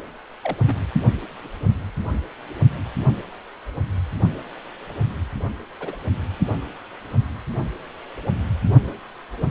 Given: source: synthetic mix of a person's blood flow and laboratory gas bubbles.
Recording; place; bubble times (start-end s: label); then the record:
Doppler ultrasound of blood flow; precordium
0.43-0.56 s: bubbles
0.64-0.84 s: bubbles
5.80-5.96 s: bubbles
From the record:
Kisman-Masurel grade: 121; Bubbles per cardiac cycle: 1 to 2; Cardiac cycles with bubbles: 10 to 50%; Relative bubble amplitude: barely perceptible (0.100 to 0.250); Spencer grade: 2 (many but less than half of the cardiac periods contain bubble signals, singularly or in groups); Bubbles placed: only in the low amplitude regions of the cardiac cycle